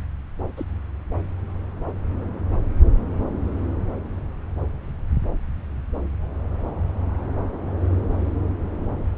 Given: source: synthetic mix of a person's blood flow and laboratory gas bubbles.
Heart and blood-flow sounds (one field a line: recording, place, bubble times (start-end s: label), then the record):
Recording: Doppler ultrasound of blood flow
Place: subclavian vein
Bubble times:
0.57-0.64 s: bubbles
From the record:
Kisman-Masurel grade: 112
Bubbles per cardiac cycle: 1 to 2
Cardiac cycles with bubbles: 1 to 10%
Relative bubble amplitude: moderate (0.250 to 0.450)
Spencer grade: 1 (occasional bubble signal discernible with the cardiac motion signal, with majority of cardiac periods free of bubbles)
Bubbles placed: anywhere in the cardiac cycle